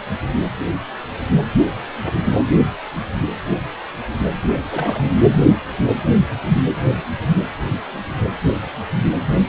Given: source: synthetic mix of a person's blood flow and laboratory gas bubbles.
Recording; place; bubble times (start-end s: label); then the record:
Doppler ultrasound of blood flow; precordium
4.42-5.04 s: bubbles
From the record:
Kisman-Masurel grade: 211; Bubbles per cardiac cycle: several, 3 to 8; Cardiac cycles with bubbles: 1 to 10%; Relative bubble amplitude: barely perceptible (0.100 to 0.250); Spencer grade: 1 (occasional bubble signal discernible with the cardiac motion signal, with majority of cardiac periods free of bubbles); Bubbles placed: anywhere in the cardiac cycle